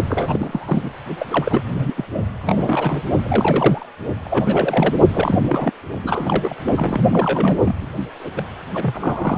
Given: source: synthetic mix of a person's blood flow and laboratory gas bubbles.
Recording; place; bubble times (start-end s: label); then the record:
Doppler ultrasound of blood flow; precordium
0.05-0.89 s: bubbles
1.19-1.25 s: bubbles
1.29-1.65 s: bubbles
1.77-1.93 s: bubbles
1.96-2.05 s: bubbles
2.38-3.02 s: bubbles
3.23-3.89 s: bubbles
4.25-4.94 s: bubbles
5.14-5.72 s: bubbles
6.04-6.56 s: bubbles
6.65-7.01 s: bubbles
7.12-7.95 s: bubbles
8.20-8.31 s: bubbles
8.36-8.43 s: bubbles
8.73-9.38 s: bubbles
From the record:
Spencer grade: 3 (all of the cardiac periods contain showers or single bubble signals, but not dominating or overriding the cardiac motion signals); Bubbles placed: only in the low amplitude regions of the cardiac cycle